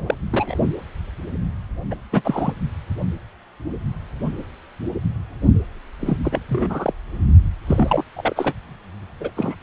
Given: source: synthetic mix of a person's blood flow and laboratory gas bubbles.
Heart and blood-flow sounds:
Doppler ultrasound of blood flow; precordium
0.07-0.14 s: bubbles
0.32-0.55 s: bubbles
1.91-1.95 s: bubbles
2.12-2.21 s: bubbles
2.24-2.52 s: bubbles
6.00-6.17 s: bubbles
6.23-6.40 s: bubbles
6.49-6.94 s: bubbles
7.15-7.25 s: bubbles
7.67-8.04 s: bubbles
8.16-8.54 s: bubbles
9.21-9.30 s: bubbles
9.37-9.55 s: bubbles
From the record:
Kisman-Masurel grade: 232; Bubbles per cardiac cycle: several, 3 to 8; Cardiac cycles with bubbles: 50 to 99%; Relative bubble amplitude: moderate (0.250 to 0.450); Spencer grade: 3 (all of the cardiac periods contain showers or single bubble signals, but not dominating or overriding the cardiac motion signals); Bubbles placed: only in the low amplitude regions of the cardiac cycle

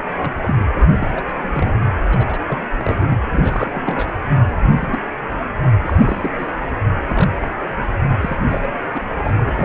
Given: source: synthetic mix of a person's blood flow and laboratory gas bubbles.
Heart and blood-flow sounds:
Doppler ultrasound of blood flow; precordium
0.20-0.33 s: bubbles
0.41-0.54 s: bubbles
0.59-0.65 s: bubbles
0.76-0.86 s: bubbles
0.89-1.38 s: bubbles
1.54-1.73 s: bubbles
2.09-2.39 s: bubbles
2.48-2.58 s: bubbles
2.77-3.06 s: bubbles
3.09-3.18 s: bubbles
3.26-4.12 s: bubbles
4.58-4.72 s: bubbles
4.80-5.00 s: bubbles
5.83-6.35 s: bubbles
6.38-6.47 s: bubbles
7.09-7.47 s: bubbles
8.21-8.35 s: bubbles
8.50-8.68 s: bubbles
8.94-9.01 s: bubbles
9.19-9.52 s: bubbles
9.56-9.65 s: bubbles
From the record:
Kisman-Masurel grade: 232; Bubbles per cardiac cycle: several, 3 to 8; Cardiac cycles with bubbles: 50 to 99%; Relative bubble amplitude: moderate (0.250 to 0.450); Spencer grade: 3 (all of the cardiac periods contain showers or single bubble signals, but not dominating or overriding the cardiac motion signals); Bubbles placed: anywhere in the cardiac cycle

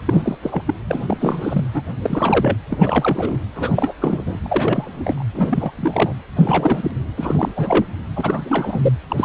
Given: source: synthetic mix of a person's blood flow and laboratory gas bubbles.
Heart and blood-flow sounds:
Doppler ultrasound of blood flow; precordium
0.05-0.37 s: bubbles
0.42-0.62 s: bubbles
0.67-0.75 s: bubbles
0.88-1.18 s: bubbles
1.20-1.65 s: bubbles
1.74-1.82 s: bubbles
2.02-2.57 s: bubbles
2.69-3.38 s: bubbles
3.55-3.93 s: bubbles
4.01-4.24 s: bubbles
4.26-4.39 s: bubbles
4.43-5.24 s: bubbles
5.33-5.72 s: bubbles
5.77-6.14 s: bubbles
6.36-6.91 s: bubbles
7.17-7.52 s: bubbles
7.56-7.85 s: bubbles
8.16-8.92 s: bubbles
9.10-9.25 s: bubbles
From the record:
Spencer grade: 3 (all of the cardiac periods contain showers or single bubble signals, but not dominating or overriding the cardiac motion signals); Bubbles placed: anywhere in the cardiac cycle

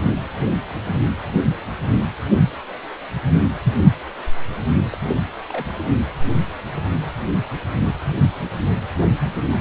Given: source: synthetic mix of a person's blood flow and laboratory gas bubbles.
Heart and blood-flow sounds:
Doppler ultrasound of blood flow; precordium
4.92-4.98 s: bubbles
5.49-5.73 s: bubbles
From the record:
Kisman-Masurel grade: 111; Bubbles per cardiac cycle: 1 to 2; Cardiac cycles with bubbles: 1 to 10%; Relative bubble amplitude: barely perceptible (0.100 to 0.250); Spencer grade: 1 (occasional bubble signal discernible with the cardiac motion signal, with majority of cardiac periods free of bubbles); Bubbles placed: anywhere in the cardiac cycle

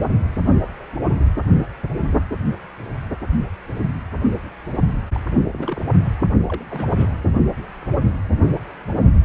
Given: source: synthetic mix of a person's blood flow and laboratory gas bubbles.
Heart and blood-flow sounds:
Doppler ultrasound of blood flow; precordium
0.02-0.16 s: bubbles
5.12-5.20 s: bubbles
5.31-5.79 s: bubbles
6.49-6.63 s: bubbles
6.70-7.10 s: bubbles
From the record:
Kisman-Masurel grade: 221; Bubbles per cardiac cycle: several, 3 to 8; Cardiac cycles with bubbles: 10 to 50%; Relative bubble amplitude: barely perceptible (0.100 to 0.250); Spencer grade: 2 (many but less than half of the cardiac periods contain bubble signals, singularly or in groups); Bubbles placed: anywhere in the cardiac cycle

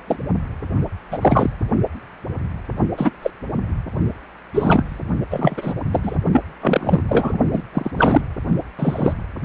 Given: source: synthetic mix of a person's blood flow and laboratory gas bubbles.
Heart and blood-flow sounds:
Doppler ultrasound of blood flow; precordium
0.07-0.16 s: bubbles
1.10-1.18 s: bubbles
1.21-1.50 s: bubbles
2.97-3.12 s: bubbles
3.22-3.31 s: bubbles
4.54-5.00 s: bubbles
5.30-5.75 s: bubbles
5.92-6.17 s: bubbles
6.32-6.41 s: bubbles
6.61-7.02 s: bubbles
7.08-7.38 s: bubbles
7.54-7.62 s: bubbles
7.73-7.91 s: bubbles
7.94-8.21 s: bubbles
8.79-9.13 s: bubbles
9.43-9.45 s: bubbles
From the record:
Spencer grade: 3 (all of the cardiac periods contain showers or single bubble signals, but not dominating or overriding the cardiac motion signals); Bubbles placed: only in the low amplitude regions of the cardiac cycle

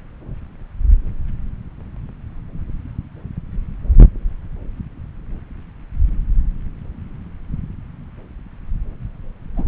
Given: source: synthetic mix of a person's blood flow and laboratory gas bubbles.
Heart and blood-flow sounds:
Doppler ultrasound of blood flow; subclavian vein
9.56-9.64 s: bubbles
From the record:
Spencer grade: 1 (occasional bubble signal discernible with the cardiac motion signal, with majority of cardiac periods free of bubbles); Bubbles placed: anywhere in the cardiac cycle

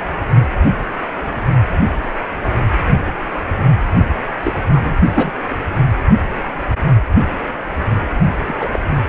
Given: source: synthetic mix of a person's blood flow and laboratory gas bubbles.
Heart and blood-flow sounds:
Doppler ultrasound of blood flow; precordium
4.28-4.32 s: bubbles
4.43-4.54 s: bubbles
4.73-4.98 s: bubbles
5.14-5.31 s: bubbles
8.47-8.54 s: bubbles
8.59-8.69 s: bubbles
8.71-8.79 s: bubbles
From the record:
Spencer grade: 2 (many but less than half of the cardiac periods contain bubble signals, singularly or in groups); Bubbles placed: only in the low amplitude regions of the cardiac cycle

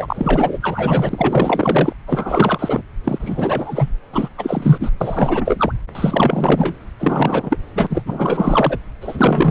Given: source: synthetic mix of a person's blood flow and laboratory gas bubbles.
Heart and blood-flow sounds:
Doppler ultrasound of blood flow; subclavian vein
0.00-0.59 s: bubbles
0.61-1.93 s: bubbles
2.06-2.82 s: bubbles
3.04-3.89 s: bubbles
4.12-4.29 s: bubbles
4.37-4.90 s: bubbles
5.00-5.74 s: bubbles
5.95-6.75 s: bubbles
6.99-7.58 s: bubbles
7.75-7.87 s: bubbles
7.89-8.03 s: bubbles
8.05-8.78 s: bubbles
9.01-9.51 s: bubbles
From the record:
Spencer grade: 4 (maximum detectable bubble signal sounding continuously throughout systole and diastole of every cardiac period, and overriding the amplitude of the normal cardiac signals); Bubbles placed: anywhere in the cardiac cycle

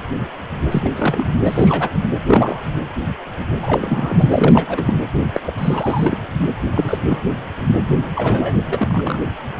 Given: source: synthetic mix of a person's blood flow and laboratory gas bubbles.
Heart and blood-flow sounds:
Doppler ultrasound of blood flow; precordium
0.71-0.90 s: bubbles
0.95-1.29 s: bubbles
1.46-1.89 s: bubbles
2.26-2.61 s: bubbles
3.62-4.29 s: bubbles
4.31-4.98 s: bubbles
5.33-5.41 s: bubbles
5.43-5.54 s: bubbles
5.58-6.18 s: bubbles
6.74-6.98 s: bubbles
7.07-7.22 s: bubbles
8.16-8.54 s: bubbles
8.67-9.20 s: bubbles
From the record:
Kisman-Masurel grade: 233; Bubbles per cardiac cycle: several, 3 to 8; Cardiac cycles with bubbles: 50 to 99%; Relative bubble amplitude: loud (0.450 to 0.775); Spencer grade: 3 (all of the cardiac periods contain showers or single bubble signals, but not dominating or overriding the cardiac motion signals); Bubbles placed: anywhere in the cardiac cycle

